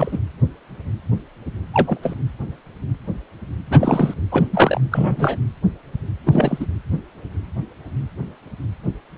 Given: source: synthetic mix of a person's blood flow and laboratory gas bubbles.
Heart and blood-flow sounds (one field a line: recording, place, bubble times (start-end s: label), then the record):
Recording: Doppler ultrasound of blood flow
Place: precordium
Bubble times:
0.00-0.18 s: bubbles
1.73-1.98 s: bubbles
2.02-2.14 s: bubbles
3.70-4.14 s: bubbles
4.32-4.44 s: bubbles
4.50-4.81 s: bubbles
4.91-5.40 s: bubbles
6.26-6.66 s: bubbles
From the record:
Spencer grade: 2 (many but less than half of the cardiac periods contain bubble signals, singularly or in groups)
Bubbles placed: anywhere in the cardiac cycle